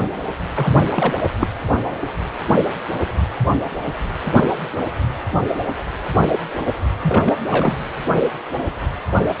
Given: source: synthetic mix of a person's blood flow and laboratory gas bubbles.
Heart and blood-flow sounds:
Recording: Doppler ultrasound of blood flow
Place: precordium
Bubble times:
0.56-0.72 s: bubbles
0.96-1.14 s: bubbles
1.39-1.47 s: bubbles
7.03-7.35 s: bubbles
7.49-7.77 s: bubbles
From the record:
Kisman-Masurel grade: 222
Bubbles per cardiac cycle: several, 3 to 8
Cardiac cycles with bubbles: 10 to 50%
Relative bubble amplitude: moderate (0.250 to 0.450)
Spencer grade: 2 (many but less than half of the cardiac periods contain bubble signals, singularly or in groups)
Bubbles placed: anywhere in the cardiac cycle

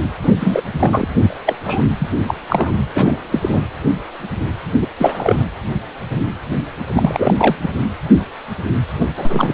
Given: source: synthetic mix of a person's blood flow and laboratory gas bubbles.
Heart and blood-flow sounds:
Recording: Doppler ultrasound of blood flow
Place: precordium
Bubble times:
0.23-0.33 s: bubbles
0.40-0.62 s: bubbles
0.79-1.08 s: bubbles
1.24-1.36 s: bubbles
1.45-1.55 s: bubbles
1.64-1.84 s: bubbles
2.00-2.08 s: bubbles
2.27-2.34 s: bubbles
2.46-2.72 s: bubbles
2.95-3.16 s: bubbles
3.32-3.63 s: bubbles
4.80-4.87 s: bubbles
4.98-5.46 s: bubbles
6.94-7.34 s: bubbles
7.37-7.56 s: bubbles
7.62-7.72 s: bubbles
8.99-9.06 s: bubbles
9.17-9.54 s: bubbles
From the record:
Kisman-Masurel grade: 233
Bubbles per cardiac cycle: several, 3 to 8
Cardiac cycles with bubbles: 50 to 99%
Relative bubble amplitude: loud (0.450 to 0.775)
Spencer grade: 3 (all of the cardiac periods contain showers or single bubble signals, but not dominating or overriding the cardiac motion signals)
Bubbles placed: anywhere in the cardiac cycle

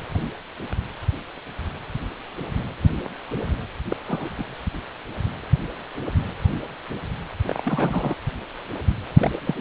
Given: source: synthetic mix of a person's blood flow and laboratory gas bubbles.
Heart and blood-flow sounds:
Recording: Doppler ultrasound of blood flow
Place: precordium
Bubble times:
3.88-3.96 s: bubbles
4.07-4.30 s: bubbles
4.38-4.44 s: bubbles
7.46-8.14 s: bubbles
9.19-9.30 s: bubbles
9.44-9.61 s: bubbles
From the record:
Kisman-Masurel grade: 221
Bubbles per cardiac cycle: several, 3 to 8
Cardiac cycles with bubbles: 10 to 50%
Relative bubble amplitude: barely perceptible (0.100 to 0.250)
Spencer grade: 2 (many but less than half of the cardiac periods contain bubble signals, singularly or in groups)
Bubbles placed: anywhere in the cardiac cycle

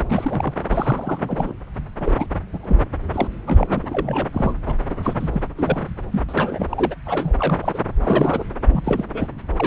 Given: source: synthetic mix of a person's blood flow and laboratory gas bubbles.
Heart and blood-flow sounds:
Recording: Doppler ultrasound of blood flow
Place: subclavian vein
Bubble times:
0.00-0.03 s: bubbles
0.10-0.53 s: bubbles
0.70-1.54 s: bubbles
2.00-2.27 s: bubbles
2.52-2.58 s: bubbles
2.63-2.81 s: bubbles
3.13-3.27 s: bubbles
3.46-4.28 s: bubbles
4.33-4.54 s: bubbles
4.66-4.75 s: bubbles
4.90-4.95 s: bubbles
5.03-5.29 s: bubbles
5.33-5.42 s: bubbles
5.56-5.91 s: bubbles
6.12-6.22 s: bubbles
6.29-6.95 s: bubbles
7.05-7.34 s: bubbles
7.38-7.79 s: bubbles
8.00-8.44 s: bubbles
8.72-9.05 s: bubbles
9.13-9.28 s: bubbles
9.56-9.66 s: bubbles
From the record:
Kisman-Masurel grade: 342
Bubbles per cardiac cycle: rolling drumbeat, 9 or more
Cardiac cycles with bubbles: 100%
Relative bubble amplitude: moderate (0.250 to 0.450)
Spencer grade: 3 (all of the cardiac periods contain showers or single bubble signals, but not dominating or overriding the cardiac motion signals)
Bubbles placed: anywhere in the cardiac cycle

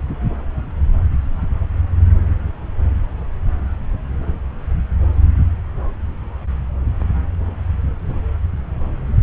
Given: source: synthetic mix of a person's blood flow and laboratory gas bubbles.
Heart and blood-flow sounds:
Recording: Doppler ultrasound of blood flow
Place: subclavian vein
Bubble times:
no bubbles
From the record:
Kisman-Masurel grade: 000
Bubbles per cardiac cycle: 0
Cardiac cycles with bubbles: 0%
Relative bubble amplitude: no bubbles discernible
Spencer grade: 0 (complete lack of bubble signals)

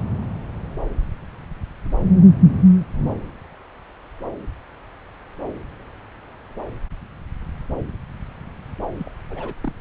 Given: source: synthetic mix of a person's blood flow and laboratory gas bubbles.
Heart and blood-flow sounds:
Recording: Doppler ultrasound of blood flow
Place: subclavian vein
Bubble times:
8.97-9.10 s: bubbles
9.29-9.54 s: bubbles
9.62-9.72 s: bubbles
From the record:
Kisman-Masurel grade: 211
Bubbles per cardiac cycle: several, 3 to 8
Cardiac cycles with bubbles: 1 to 10%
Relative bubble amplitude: barely perceptible (0.100 to 0.250)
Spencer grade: 1 (occasional bubble signal discernible with the cardiac motion signal, with majority of cardiac periods free of bubbles)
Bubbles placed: anywhere in the cardiac cycle

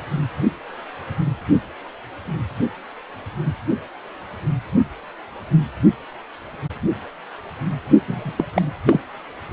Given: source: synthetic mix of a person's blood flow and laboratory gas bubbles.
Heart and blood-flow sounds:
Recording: Doppler ultrasound of blood flow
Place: precordium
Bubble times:
8.08-8.33 s: bubbles
8.37-8.45 s: bubbles
8.55-8.62 s: bubbles
8.87-9.01 s: bubbles
From the record:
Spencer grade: 1 (occasional bubble signal discernible with the cardiac motion signal, with majority of cardiac periods free of bubbles)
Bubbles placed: only in the low amplitude regions of the cardiac cycle

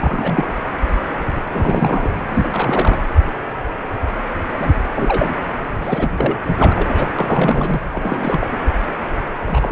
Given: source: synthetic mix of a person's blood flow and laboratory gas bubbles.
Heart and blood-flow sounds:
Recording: Doppler ultrasound of blood flow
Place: precordium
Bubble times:
0.00-0.50 s: bubbles
1.50-2.10 s: bubbles
2.29-2.48 s: bubbles
2.51-2.99 s: bubbles
4.54-4.74 s: bubbles
4.93-5.35 s: bubbles
5.81-6.39 s: bubbles
6.48-6.53 s: bubbles
6.57-7.08 s: bubbles
7.15-7.81 s: bubbles
7.94-8.58 s: bubbles
9.46-9.72 s: bubbles
From the record:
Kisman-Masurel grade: 332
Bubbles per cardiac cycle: rolling drumbeat, 9 or more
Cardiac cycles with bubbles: 50 to 99%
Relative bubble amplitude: moderate (0.250 to 0.450)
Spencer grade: 3 (all of the cardiac periods contain showers or single bubble signals, but not dominating or overriding the cardiac motion signals)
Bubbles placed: anywhere in the cardiac cycle

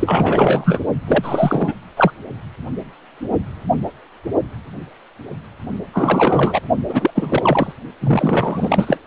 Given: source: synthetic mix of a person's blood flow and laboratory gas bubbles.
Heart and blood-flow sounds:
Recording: Doppler ultrasound of blood flow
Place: precordium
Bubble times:
0.00-0.79 s: bubbles
1.07-1.75 s: bubbles
1.96-2.11 s: bubbles
5.93-6.60 s: bubbles
6.89-7.10 s: bubbles
7.15-7.72 s: bubbles
8.01-8.97 s: bubbles
From the record:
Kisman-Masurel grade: 333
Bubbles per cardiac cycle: rolling drumbeat, 9 or more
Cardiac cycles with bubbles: 50 to 99%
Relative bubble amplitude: loud (0.450 to 0.775)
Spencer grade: 3 (all of the cardiac periods contain showers or single bubble signals, but not dominating or overriding the cardiac motion signals)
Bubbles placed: only in the low amplitude regions of the cardiac cycle

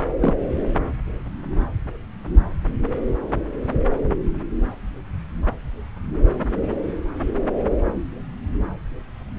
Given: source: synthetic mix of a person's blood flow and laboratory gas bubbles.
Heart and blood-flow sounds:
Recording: Doppler ultrasound of blood flow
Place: subclavian vein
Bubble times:
0.21-0.33 s: bubbles
From the record:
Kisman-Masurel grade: 112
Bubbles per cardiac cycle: 1 to 2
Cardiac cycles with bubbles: 1 to 10%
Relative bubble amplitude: moderate (0.250 to 0.450)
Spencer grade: 1 (occasional bubble signal discernible with the cardiac motion signal, with majority of cardiac periods free of bubbles)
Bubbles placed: anywhere in the cardiac cycle

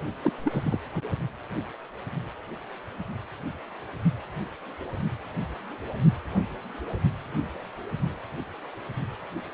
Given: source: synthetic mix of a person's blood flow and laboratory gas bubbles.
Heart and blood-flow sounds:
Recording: Doppler ultrasound of blood flow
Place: precordium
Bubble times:
0.21-0.33 s: bubbles
0.44-0.79 s: bubbles
0.94-1.01 s: bubbles
From the record:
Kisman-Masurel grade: 221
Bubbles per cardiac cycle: several, 3 to 8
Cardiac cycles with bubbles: 10 to 50%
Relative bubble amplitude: barely perceptible (0.100 to 0.250)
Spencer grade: 2 (many but less than half of the cardiac periods contain bubble signals, singularly or in groups)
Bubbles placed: only in the low amplitude regions of the cardiac cycle

